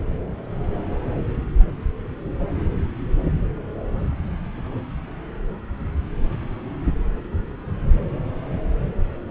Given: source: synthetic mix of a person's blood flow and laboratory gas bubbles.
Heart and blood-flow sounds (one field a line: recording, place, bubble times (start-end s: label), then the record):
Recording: Doppler ultrasound of blood flow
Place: subclavian vein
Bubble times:
no bubbles
From the record:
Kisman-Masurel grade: 000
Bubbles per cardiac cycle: 0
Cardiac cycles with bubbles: 0%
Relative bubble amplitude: no bubbles discernible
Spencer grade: 0 (complete lack of bubble signals)